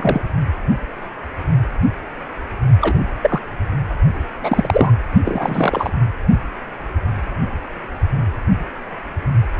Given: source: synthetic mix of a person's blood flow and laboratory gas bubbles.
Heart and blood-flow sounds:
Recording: Doppler ultrasound of blood flow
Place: precordium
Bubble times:
0.00-0.21 s: bubbles
2.81-3.05 s: bubbles
3.21-3.42 s: bubbles
4.38-4.92 s: bubbles
5.22-5.91 s: bubbles
From the record:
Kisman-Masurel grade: 233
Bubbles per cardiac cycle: several, 3 to 8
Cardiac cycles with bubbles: 50 to 99%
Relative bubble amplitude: loud (0.450 to 0.775)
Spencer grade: 3 (all of the cardiac periods contain showers or single bubble signals, but not dominating or overriding the cardiac motion signals)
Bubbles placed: only in the low amplitude regions of the cardiac cycle

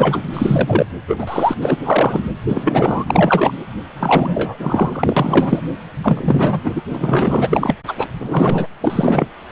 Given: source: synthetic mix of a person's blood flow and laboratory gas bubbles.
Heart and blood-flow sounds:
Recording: Doppler ultrasound of blood flow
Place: precordium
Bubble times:
0.00-0.22 s: bubbles
0.33-0.86 s: bubbles
1.07-1.56 s: bubbles
1.60-1.79 s: bubbles
1.83-2.24 s: bubbles
2.48-3.54 s: bubbles
3.99-5.61 s: bubbles
6.03-6.60 s: bubbles
6.63-6.81 s: bubbles
6.88-7.75 s: bubbles
7.87-8.09 s: bubbles
8.20-8.67 s: bubbles
8.80-9.26 s: bubbles
From the record:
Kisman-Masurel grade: 343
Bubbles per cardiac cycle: rolling drumbeat, 9 or more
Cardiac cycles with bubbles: 100%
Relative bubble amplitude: loud (0.450 to 0.775)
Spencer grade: 3 (all of the cardiac periods contain showers or single bubble signals, but not dominating or overriding the cardiac motion signals)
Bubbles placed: anywhere in the cardiac cycle

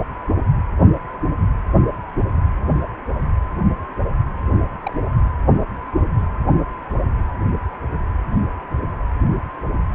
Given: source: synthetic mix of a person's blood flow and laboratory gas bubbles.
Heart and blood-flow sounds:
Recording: Doppler ultrasound of blood flow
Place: precordium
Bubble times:
4.85-4.96 s: bubbles
From the record:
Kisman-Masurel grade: 111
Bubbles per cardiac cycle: 1 to 2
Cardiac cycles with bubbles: 1 to 10%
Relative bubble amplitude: barely perceptible (0.100 to 0.250)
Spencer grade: 1 (occasional bubble signal discernible with the cardiac motion signal, with majority of cardiac periods free of bubbles)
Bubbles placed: anywhere in the cardiac cycle

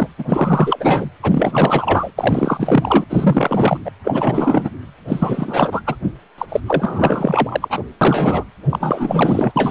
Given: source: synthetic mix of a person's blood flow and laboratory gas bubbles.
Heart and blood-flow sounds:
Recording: Doppler ultrasound of blood flow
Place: precordium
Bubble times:
0.00-0.08 s: bubbles
0.18-0.24 s: bubbles
0.28-1.09 s: bubbles
1.22-2.11 s: bubbles
2.18-3.04 s: bubbles
3.09-3.79 s: bubbles
3.84-3.91 s: bubbles
4.04-4.70 s: bubbles
5.08-5.81 s: bubbles
5.86-5.96 s: bubbles
6.38-6.46 s: bubbles
6.48-6.60 s: bubbles
6.67-7.83 s: bubbles
8.01-8.44 s: bubbles
8.70-9.53 s: bubbles
9.56-9.71 s: bubbles
From the record:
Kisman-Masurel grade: 444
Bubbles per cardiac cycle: continuous sound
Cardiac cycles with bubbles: 100%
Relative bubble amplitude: maximal (0.775 to 0.999)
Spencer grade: 4 (maximum detectable bubble signal sounding continuously throughout systole and diastole of every cardiac period, and overriding the amplitude of the normal cardiac signals)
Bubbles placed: anywhere in the cardiac cycle

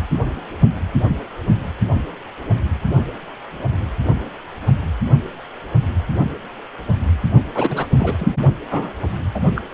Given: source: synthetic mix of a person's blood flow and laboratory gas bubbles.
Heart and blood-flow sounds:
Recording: Doppler ultrasound of blood flow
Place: precordium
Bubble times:
7.54-7.86 s: bubbles
7.96-8.26 s: bubbles
8.71-8.93 s: bubbles
9.34-9.46 s: bubbles
9.55-9.62 s: bubbles
From the record:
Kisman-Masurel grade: 222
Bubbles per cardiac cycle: several, 3 to 8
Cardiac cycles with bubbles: 10 to 50%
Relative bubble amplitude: moderate (0.250 to 0.450)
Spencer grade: 2 (many but less than half of the cardiac periods contain bubble signals, singularly or in groups)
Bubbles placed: only in the low amplitude regions of the cardiac cycle

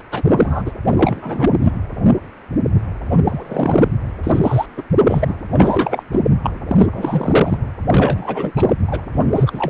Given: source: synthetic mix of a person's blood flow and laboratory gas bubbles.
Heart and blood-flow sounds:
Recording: Doppler ultrasound of blood flow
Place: precordium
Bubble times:
0.11-0.23 s: bubbles
0.28-0.62 s: bubbles
0.65-0.72 s: bubbles
0.88-1.50 s: bubbles
1.62-1.73 s: bubbles
3.11-3.19 s: bubbles
3.23-3.92 s: bubbles
4.23-4.39 s: bubbles
4.42-4.66 s: bubbles
4.76-4.83 s: bubbles
5.06-5.34 s: bubbles
5.51-6.04 s: bubbles
6.12-6.23 s: bubbles
6.43-6.50 s: bubbles
6.68-6.87 s: bubbles
6.92-7.58 s: bubbles
7.89-8.77 s: bubbles
8.87-9.03 s: bubbles
9.12-9.31 s: bubbles
9.34-9.70 s: bubbles
From the record:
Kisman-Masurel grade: 333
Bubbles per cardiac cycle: rolling drumbeat, 9 or more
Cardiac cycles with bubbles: 50 to 99%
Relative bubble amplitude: loud (0.450 to 0.775)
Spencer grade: 3 (all of the cardiac periods contain showers or single bubble signals, but not dominating or overriding the cardiac motion signals)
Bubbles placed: anywhere in the cardiac cycle

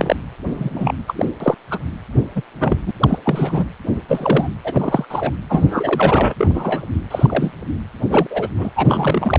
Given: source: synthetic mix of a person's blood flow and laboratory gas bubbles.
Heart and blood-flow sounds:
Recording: Doppler ultrasound of blood flow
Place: precordium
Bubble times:
0.00-0.16 s: bubbles
0.53-0.94 s: bubbles
1.08-1.26 s: bubbles
1.40-1.55 s: bubbles
1.71-1.78 s: bubbles
2.35-2.42 s: bubbles
2.59-2.77 s: bubbles
2.86-2.91 s: bubbles
2.99-3.19 s: bubbles
3.25-3.64 s: bubbles
4.08-4.48 s: bubbles
4.64-5.05 s: bubbles
5.10-5.33 s: bubbles
5.50-6.34 s: bubbles
6.37-6.47 s: bubbles
6.50-6.83 s: bubbles
7.10-7.52 s: bubbles
8.10-8.27 s: bubbles
8.30-8.48 s: bubbles
8.58-8.71 s: bubbles
8.76-9.39 s: bubbles
From the record:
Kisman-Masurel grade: 242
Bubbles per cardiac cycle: several, 3 to 8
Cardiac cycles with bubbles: 100%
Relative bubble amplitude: moderate (0.250 to 0.450)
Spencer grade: 3 (all of the cardiac periods contain showers or single bubble signals, but not dominating or overriding the cardiac motion signals)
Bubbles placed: anywhere in the cardiac cycle

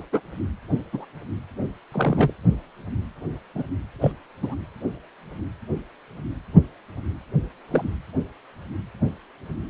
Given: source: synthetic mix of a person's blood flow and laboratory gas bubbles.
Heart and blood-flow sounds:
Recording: Doppler ultrasound of blood flow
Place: precordium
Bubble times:
0.12-0.20 s: bubbles
0.93-1.05 s: bubbles
1.92-2.33 s: bubbles
3.55-3.62 s: bubbles
4.01-4.11 s: bubbles
4.42-4.54 s: bubbles
7.68-7.93 s: bubbles
From the record:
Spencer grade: 2 (many but less than half of the cardiac periods contain bubble signals, singularly or in groups)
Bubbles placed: anywhere in the cardiac cycle

